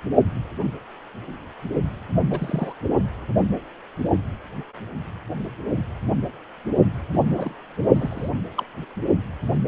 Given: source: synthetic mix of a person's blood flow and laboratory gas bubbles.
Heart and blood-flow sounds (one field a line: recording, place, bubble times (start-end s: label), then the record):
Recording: Doppler ultrasound of blood flow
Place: precordium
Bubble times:
2.30-2.73 s: bubbles
7.12-7.53 s: bubbles
7.95-8.29 s: bubbles
8.57-8.63 s: bubbles
9.66-9.68 s: bubbles
From the record:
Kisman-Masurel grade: 121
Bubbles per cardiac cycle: 1 to 2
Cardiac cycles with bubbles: 10 to 50%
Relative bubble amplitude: barely perceptible (0.100 to 0.250)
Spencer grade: 2 (many but less than half of the cardiac periods contain bubble signals, singularly or in groups)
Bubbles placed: only in the low amplitude regions of the cardiac cycle